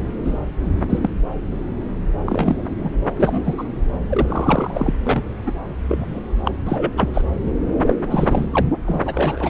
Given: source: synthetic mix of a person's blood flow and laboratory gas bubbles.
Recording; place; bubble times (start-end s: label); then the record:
Doppler ultrasound of blood flow; subclavian vein
0.24-0.39 s: bubbles
0.89-1.10 s: bubbles
2.25-2.63 s: bubbles
2.78-2.90 s: bubbles
3.17-3.54 s: bubbles
3.57-3.65 s: bubbles
4.09-4.94 s: bubbles
5.03-5.23 s: bubbles
5.46-5.52 s: bubbles
5.88-6.20 s: bubbles
6.45-6.51 s: bubbles
6.65-6.93 s: bubbles
6.97-7.10 s: bubbles
7.14-7.22 s: bubbles
7.86-7.93 s: bubbles
8.10-8.46 s: bubbles
8.51-8.62 s: bubbles
8.86-9.02 s: bubbles
9.05-9.50 s: bubbles
From the record:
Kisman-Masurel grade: 233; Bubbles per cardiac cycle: several, 3 to 8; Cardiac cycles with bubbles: 50 to 99%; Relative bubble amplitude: loud (0.450 to 0.775); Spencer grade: 3 (all of the cardiac periods contain showers or single bubble signals, but not dominating or overriding the cardiac motion signals); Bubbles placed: anywhere in the cardiac cycle